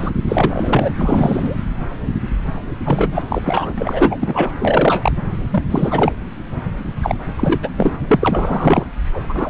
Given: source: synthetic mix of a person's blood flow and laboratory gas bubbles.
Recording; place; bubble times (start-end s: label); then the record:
Doppler ultrasound of blood flow; subclavian vein
0.00-0.10 s: bubbles
0.28-0.92 s: bubbles
0.98-1.56 s: bubbles
2.85-3.11 s: bubbles
3.14-3.23 s: bubbles
3.29-3.74 s: bubbles
3.77-4.18 s: bubbles
4.20-4.52 s: bubbles
4.59-5.12 s: bubbles
5.51-5.63 s: bubbles
5.70-6.13 s: bubbles
7.03-7.15 s: bubbles
7.36-7.72 s: bubbles
7.77-7.96 s: bubbles
8.08-8.87 s: bubbles
9.13-9.21 s: bubbles
9.29-9.50 s: bubbles
From the record:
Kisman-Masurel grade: 333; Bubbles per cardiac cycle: rolling drumbeat, 9 or more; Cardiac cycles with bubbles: 50 to 99%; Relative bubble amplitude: loud (0.450 to 0.775); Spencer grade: 3 (all of the cardiac periods contain showers or single bubble signals, but not dominating or overriding the cardiac motion signals); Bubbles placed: anywhere in the cardiac cycle